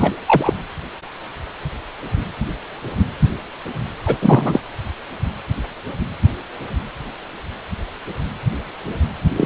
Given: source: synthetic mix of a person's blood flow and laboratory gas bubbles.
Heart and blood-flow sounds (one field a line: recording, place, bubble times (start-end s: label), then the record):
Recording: Doppler ultrasound of blood flow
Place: precordium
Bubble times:
0.00-0.13 s: bubbles
0.27-0.54 s: bubbles
4.05-4.17 s: bubbles
4.21-4.62 s: bubbles
9.36-9.45 s: bubbles
From the record:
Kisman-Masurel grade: 223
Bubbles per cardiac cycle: several, 3 to 8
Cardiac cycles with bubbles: 10 to 50%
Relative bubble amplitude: loud (0.450 to 0.775)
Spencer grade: 2 (many but less than half of the cardiac periods contain bubble signals, singularly or in groups)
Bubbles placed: anywhere in the cardiac cycle